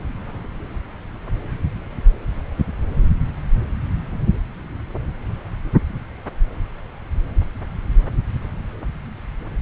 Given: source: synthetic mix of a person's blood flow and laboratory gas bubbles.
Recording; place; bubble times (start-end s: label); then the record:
Doppler ultrasound of blood flow; subclavian vein
no bubbles
From the record:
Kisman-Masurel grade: 000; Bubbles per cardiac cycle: 0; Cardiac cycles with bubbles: 0%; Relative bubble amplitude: no bubbles discernible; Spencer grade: 0 (complete lack of bubble signals)